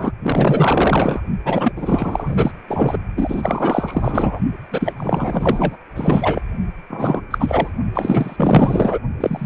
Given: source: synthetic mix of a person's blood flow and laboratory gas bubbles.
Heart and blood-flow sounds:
Doppler ultrasound of blood flow; precordium
0.00-0.11 s: bubbles
0.22-1.21 s: bubbles
1.45-1.72 s: bubbles
1.76-2.51 s: bubbles
2.68-2.98 s: bubbles
3.17-4.40 s: bubbles
4.71-4.94 s: bubbles
4.96-5.77 s: bubbles
5.95-6.42 s: bubbles
6.89-7.21 s: bubbles
7.30-7.72 s: bubbles
7.94-8.99 s: bubbles
9.20-9.46 s: bubbles
From the record:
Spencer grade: 4 (maximum detectable bubble signal sounding continuously throughout systole and diastole of every cardiac period, and overriding the amplitude of the normal cardiac signals); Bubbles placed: only in the low amplitude regions of the cardiac cycle

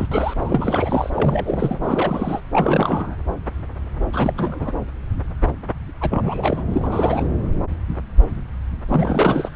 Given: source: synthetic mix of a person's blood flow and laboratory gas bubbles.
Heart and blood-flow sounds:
Doppler ultrasound of blood flow; subclavian vein
0.00-0.06 s: bubbles
0.10-1.10 s: bubbles
1.14-1.78 s: bubbles
1.84-2.41 s: bubbles
2.52-3.16 s: bubbles
4.12-4.72 s: bubbles
6.01-6.63 s: bubbles
6.71-7.27 s: bubbles
8.88-9.49 s: bubbles
From the record:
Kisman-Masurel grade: 332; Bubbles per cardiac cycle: rolling drumbeat, 9 or more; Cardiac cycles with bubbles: 50 to 99%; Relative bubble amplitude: moderate (0.250 to 0.450); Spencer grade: 3 (all of the cardiac periods contain showers or single bubble signals, but not dominating or overriding the cardiac motion signals); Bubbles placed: anywhere in the cardiac cycle

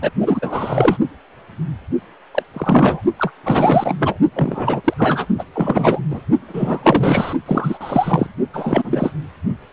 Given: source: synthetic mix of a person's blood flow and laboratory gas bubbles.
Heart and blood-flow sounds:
Doppler ultrasound of blood flow; precordium
0.01-0.11 s: bubbles
0.19-0.97 s: bubbles
2.34-2.42 s: bubbles
2.53-3.01 s: bubbles
3.19-3.31 s: bubbles
3.44-3.95 s: bubbles
3.98-4.18 s: bubbles
4.35-4.82 s: bubbles
4.84-4.94 s: bubbles
4.98-5.27 s: bubbles
5.38-5.44 s: bubbles
5.54-6.00 s: bubbles
6.10-6.22 s: bubbles
6.48-7.35 s: bubbles
7.46-7.78 s: bubbles
7.81-8.29 s: bubbles
8.53-9.14 s: bubbles
From the record:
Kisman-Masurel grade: 343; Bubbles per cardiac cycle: rolling drumbeat, 9 or more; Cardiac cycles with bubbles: 100%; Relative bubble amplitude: loud (0.450 to 0.775); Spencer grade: 3 (all of the cardiac periods contain showers or single bubble signals, but not dominating or overriding the cardiac motion signals); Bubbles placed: only in the low amplitude regions of the cardiac cycle

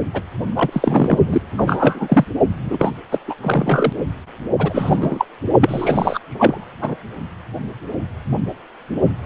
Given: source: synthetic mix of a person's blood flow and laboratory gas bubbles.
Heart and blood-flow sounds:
Doppler ultrasound of blood flow; precordium
0.14-0.22 s: bubbles
0.56-0.69 s: bubbles
0.72-1.19 s: bubbles
1.27-1.42 s: bubbles
1.57-2.25 s: bubbles
2.65-2.90 s: bubbles
3.11-3.19 s: bubbles
3.28-3.34 s: bubbles
3.42-3.93 s: bubbles
4.58-5.25 s: bubbles
5.61-6.19 s: bubbles
6.29-6.65 s: bubbles
6.81-6.96 s: bubbles
From the record:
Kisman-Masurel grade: 333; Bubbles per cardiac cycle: rolling drumbeat, 9 or more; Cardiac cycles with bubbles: 50 to 99%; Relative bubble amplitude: loud (0.450 to 0.775); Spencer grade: 3 (all of the cardiac periods contain showers or single bubble signals, but not dominating or overriding the cardiac motion signals); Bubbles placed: only in the low amplitude regions of the cardiac cycle

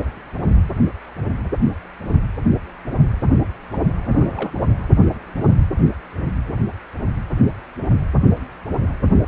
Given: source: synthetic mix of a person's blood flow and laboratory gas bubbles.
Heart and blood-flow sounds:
Doppler ultrasound of blood flow; precordium
4.04-4.51 s: bubbles
From the record:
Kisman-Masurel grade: 111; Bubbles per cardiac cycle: 1 to 2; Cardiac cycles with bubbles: 1 to 10%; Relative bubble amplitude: barely perceptible (0.100 to 0.250); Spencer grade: 1 (occasional bubble signal discernible with the cardiac motion signal, with majority of cardiac periods free of bubbles); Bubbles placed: anywhere in the cardiac cycle

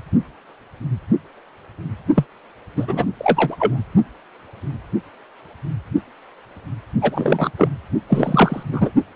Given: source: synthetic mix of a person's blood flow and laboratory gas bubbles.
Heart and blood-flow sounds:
Doppler ultrasound of blood flow; precordium
2.15-2.25 s: bubbles
2.76-3.06 s: bubbles
3.18-3.79 s: bubbles
7.00-7.52 s: bubbles
7.58-7.68 s: bubbles
8.08-8.63 s: bubbles
8.71-8.91 s: bubbles
From the record:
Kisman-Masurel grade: 223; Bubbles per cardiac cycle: several, 3 to 8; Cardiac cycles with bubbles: 10 to 50%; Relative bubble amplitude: loud (0.450 to 0.775); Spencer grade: 2 (many but less than half of the cardiac periods contain bubble signals, singularly or in groups); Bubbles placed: only in the low amplitude regions of the cardiac cycle

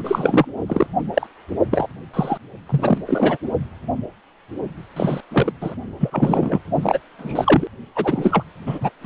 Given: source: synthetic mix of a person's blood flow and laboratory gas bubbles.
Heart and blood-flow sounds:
Doppler ultrasound of blood flow; precordium
0.00-0.45 s: bubbles
0.67-0.86 s: bubbles
1.14-1.27 s: bubbles
1.71-1.88 s: bubbles
2.13-2.38 s: bubbles
2.69-2.98 s: bubbles
3.06-3.37 s: bubbles
4.96-5.21 s: bubbles
5.31-5.51 s: bubbles
5.60-5.75 s: bubbles
6.00-6.60 s: bubbles
6.82-6.99 s: bubbles
7.18-7.67 s: bubbles
7.95-8.44 s: bubbles
8.66-8.78 s: bubbles
8.81-8.89 s: bubbles
9.01-9.06 s: bubbles
From the record:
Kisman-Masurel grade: 233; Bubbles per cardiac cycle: several, 3 to 8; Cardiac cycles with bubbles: 50 to 99%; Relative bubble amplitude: loud (0.450 to 0.775); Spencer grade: 3 (all of the cardiac periods contain showers or single bubble signals, but not dominating or overriding the cardiac motion signals); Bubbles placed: only in the low amplitude regions of the cardiac cycle

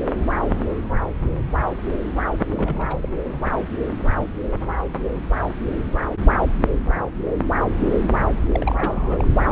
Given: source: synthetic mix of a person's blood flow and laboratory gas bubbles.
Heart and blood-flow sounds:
Doppler ultrasound of blood flow; subclavian vein
2.49-2.97 s: bubbles
3.03-3.08 s: bubbles
8.51-9.27 s: bubbles
From the record:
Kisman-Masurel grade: 221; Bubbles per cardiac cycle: several, 3 to 8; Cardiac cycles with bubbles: 10 to 50%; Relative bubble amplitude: barely perceptible (0.100 to 0.250); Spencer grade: 2 (many but less than half of the cardiac periods contain bubble signals, singularly or in groups); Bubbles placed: anywhere in the cardiac cycle

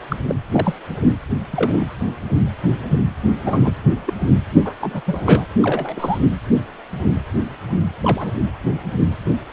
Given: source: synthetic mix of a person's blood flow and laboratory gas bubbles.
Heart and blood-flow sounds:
Doppler ultrasound of blood flow; precordium
0.08-0.16 s: bubbles
0.28-0.35 s: bubbles
0.51-0.74 s: bubbles
1.53-1.87 s: bubbles
3.46-3.71 s: bubbles
4.06-4.13 s: bubbles
4.64-4.73 s: bubbles
4.82-5.04 s: bubbles
5.06-5.46 s: bubbles
5.62-6.18 s: bubbles
7.70-7.77 s: bubbles
8.01-8.31 s: bubbles
From the record:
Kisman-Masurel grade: 232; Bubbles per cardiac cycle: several, 3 to 8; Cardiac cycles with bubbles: 50 to 99%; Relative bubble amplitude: moderate (0.250 to 0.450); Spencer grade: 3 (all of the cardiac periods contain showers or single bubble signals, but not dominating or overriding the cardiac motion signals); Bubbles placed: anywhere in the cardiac cycle

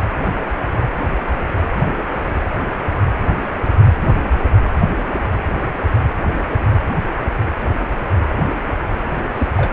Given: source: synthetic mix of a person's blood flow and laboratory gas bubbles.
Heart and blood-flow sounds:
Doppler ultrasound of blood flow; precordium
9.33-9.47 s: bubbles
9.57-9.71 s: bubbles
From the record:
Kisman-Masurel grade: 111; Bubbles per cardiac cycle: 1 to 2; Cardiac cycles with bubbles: 1 to 10%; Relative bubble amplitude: barely perceptible (0.100 to 0.250); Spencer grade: 1 (occasional bubble signal discernible with the cardiac motion signal, with majority of cardiac periods free of bubbles); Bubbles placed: anywhere in the cardiac cycle

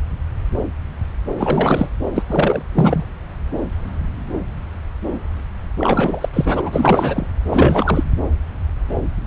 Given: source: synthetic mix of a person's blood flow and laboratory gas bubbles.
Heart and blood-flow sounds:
Doppler ultrasound of blood flow; subclavian vein
1.38-1.89 s: bubbles
2.16-2.24 s: bubbles
2.28-2.62 s: bubbles
2.74-3.04 s: bubbles
5.78-6.29 s: bubbles
6.33-6.70 s: bubbles
6.72-7.26 s: bubbles
7.50-8.04 s: bubbles
From the record:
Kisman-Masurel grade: 333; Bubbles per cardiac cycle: rolling drumbeat, 9 or more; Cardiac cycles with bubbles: 50 to 99%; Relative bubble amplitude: loud (0.450 to 0.775); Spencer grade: 3 (all of the cardiac periods contain showers or single bubble signals, but not dominating or overriding the cardiac motion signals); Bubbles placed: anywhere in the cardiac cycle

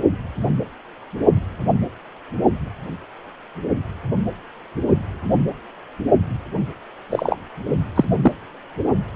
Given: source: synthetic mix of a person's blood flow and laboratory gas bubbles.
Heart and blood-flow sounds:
Doppler ultrasound of blood flow; precordium
7.10-7.36 s: bubbles
7.96-8.04 s: bubbles
8.22-8.32 s: bubbles
From the record:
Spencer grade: 2 (many but less than half of the cardiac periods contain bubble signals, singularly or in groups); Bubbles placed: only in the low amplitude regions of the cardiac cycle

